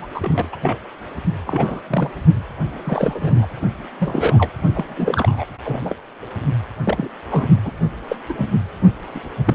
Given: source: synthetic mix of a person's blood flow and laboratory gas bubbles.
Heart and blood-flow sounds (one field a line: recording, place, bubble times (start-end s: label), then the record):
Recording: Doppler ultrasound of blood flow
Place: precordium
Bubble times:
0.00-0.07 s: bubbles
0.14-0.48 s: bubbles
0.52-0.57 s: bubbles
0.62-0.79 s: bubbles
1.47-1.80 s: bubbles
1.90-2.10 s: bubbles
2.65-3.47 s: bubbles
4.00-4.51 s: bubbles
4.74-5.45 s: bubbles
5.65-5.95 s: bubbles
6.85-7.08 s: bubbles
7.31-7.48 s: bubbles
7.65-7.72 s: bubbles
8.08-8.16 s: bubbles
8.29-8.33 s: bubbles
8.38-8.47 s: bubbles
9.14-9.21 s: bubbles
9.45-9.55 s: bubbles
From the record:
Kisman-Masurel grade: 242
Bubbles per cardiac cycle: several, 3 to 8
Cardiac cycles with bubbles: 100%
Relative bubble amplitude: moderate (0.250 to 0.450)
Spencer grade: 3 (all of the cardiac periods contain showers or single bubble signals, but not dominating or overriding the cardiac motion signals)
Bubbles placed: anywhere in the cardiac cycle